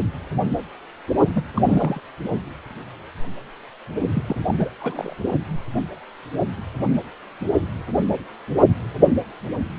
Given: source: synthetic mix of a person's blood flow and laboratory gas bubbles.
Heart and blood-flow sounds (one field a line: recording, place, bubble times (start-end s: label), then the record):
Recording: Doppler ultrasound of blood flow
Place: precordium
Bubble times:
1.33-1.43 s: bubbles
1.54-2.00 s: bubbles
4.14-4.24 s: bubbles
4.26-4.41 s: bubbles
4.45-4.70 s: bubbles
4.79-5.16 s: bubbles
From the record:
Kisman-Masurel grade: 221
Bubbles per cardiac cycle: several, 3 to 8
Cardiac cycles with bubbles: 10 to 50%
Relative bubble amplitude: barely perceptible (0.100 to 0.250)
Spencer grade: 2 (many but less than half of the cardiac periods contain bubble signals, singularly or in groups)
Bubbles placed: only in the low amplitude regions of the cardiac cycle